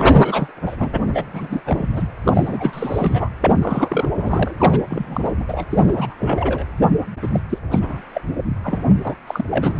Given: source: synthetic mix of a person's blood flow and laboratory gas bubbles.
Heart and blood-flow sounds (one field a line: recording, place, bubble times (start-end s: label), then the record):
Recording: Doppler ultrasound of blood flow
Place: precordium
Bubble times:
0.00-0.52 s: bubbles
0.66-0.76 s: bubbles
0.80-0.92 s: bubbles
1.06-1.11 s: bubbles
1.14-1.24 s: bubbles
1.33-1.60 s: bubbles
1.65-2.08 s: bubbles
2.24-3.30 s: bubbles
3.41-4.09 s: bubbles
4.14-4.54 s: bubbles
4.58-5.33 s: bubbles
5.40-5.45 s: bubbles
5.48-5.66 s: bubbles
5.71-6.15 s: bubbles
6.19-6.67 s: bubbles
7.21-7.28 s: bubbles
7.33-7.40 s: bubbles
7.49-7.58 s: bubbles
7.71-8.02 s: bubbles
8.14-8.21 s: bubbles
8.63-8.81 s: bubbles
9.04-9.15 s: bubbles
9.27-9.45 s: bubbles
9.51-9.77 s: bubbles
From the record:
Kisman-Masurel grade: 342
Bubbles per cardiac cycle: rolling drumbeat, 9 or more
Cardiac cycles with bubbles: 100%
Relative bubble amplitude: moderate (0.250 to 0.450)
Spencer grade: 3 (all of the cardiac periods contain showers or single bubble signals, but not dominating or overriding the cardiac motion signals)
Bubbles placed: anywhere in the cardiac cycle